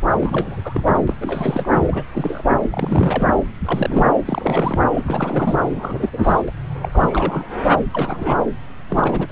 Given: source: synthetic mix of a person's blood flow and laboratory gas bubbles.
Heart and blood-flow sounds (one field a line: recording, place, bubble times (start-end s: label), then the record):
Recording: Doppler ultrasound of blood flow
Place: subclavian vein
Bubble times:
0.11-1.16 s: bubbles
1.21-2.03 s: bubbles
2.14-2.44 s: bubbles
2.62-3.33 s: bubbles
3.65-4.13 s: bubbles
4.25-4.79 s: bubbles
4.94-5.59 s: bubbles
5.75-6.09 s: bubbles
6.12-6.18 s: bubbles
6.23-6.43 s: bubbles
6.46-6.50 s: bubbles
6.82-6.89 s: bubbles
6.92-7.48 s: bubbles
7.93-8.46 s: bubbles
8.88-9.31 s: bubbles
From the record:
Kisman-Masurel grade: 342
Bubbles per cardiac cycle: rolling drumbeat, 9 or more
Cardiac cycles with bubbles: 100%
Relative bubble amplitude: moderate (0.250 to 0.450)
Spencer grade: 3 (all of the cardiac periods contain showers or single bubble signals, but not dominating or overriding the cardiac motion signals)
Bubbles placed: anywhere in the cardiac cycle